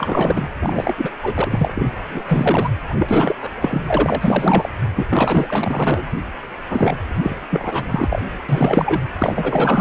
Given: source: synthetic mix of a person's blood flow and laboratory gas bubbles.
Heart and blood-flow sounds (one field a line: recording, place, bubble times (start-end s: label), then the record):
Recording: Doppler ultrasound of blood flow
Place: precordium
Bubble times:
0.00-0.47 s: bubbles
0.59-1.10 s: bubbles
1.22-1.90 s: bubbles
2.10-2.70 s: bubbles
2.90-3.35 s: bubbles
3.41-3.50 s: bubbles
3.59-3.81 s: bubbles
3.87-4.69 s: bubbles
4.95-5.05 s: bubbles
5.09-6.05 s: bubbles
6.69-6.98 s: bubbles
7.02-7.46 s: bubbles
7.50-8.22 s: bubbles
8.49-9.00 s: bubbles
9.18-9.81 s: bubbles
From the record:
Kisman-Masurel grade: 444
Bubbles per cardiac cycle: continuous sound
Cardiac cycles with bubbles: 100%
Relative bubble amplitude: maximal (0.775 to 0.999)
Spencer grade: 4 (maximum detectable bubble signal sounding continuously throughout systole and diastole of every cardiac period, and overriding the amplitude of the normal cardiac signals)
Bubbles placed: anywhere in the cardiac cycle